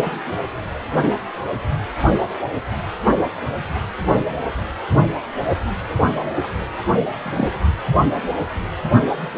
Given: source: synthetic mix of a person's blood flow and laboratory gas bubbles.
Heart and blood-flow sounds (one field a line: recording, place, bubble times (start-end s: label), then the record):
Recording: Doppler ultrasound of blood flow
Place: precordium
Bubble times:
6.61-6.66 s: bubbles
7.22-7.64 s: bubbles
From the record:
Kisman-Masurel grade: 122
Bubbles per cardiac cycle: 1 to 2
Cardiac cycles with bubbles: 10 to 50%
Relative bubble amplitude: moderate (0.250 to 0.450)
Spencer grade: 2 (many but less than half of the cardiac periods contain bubble signals, singularly or in groups)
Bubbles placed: anywhere in the cardiac cycle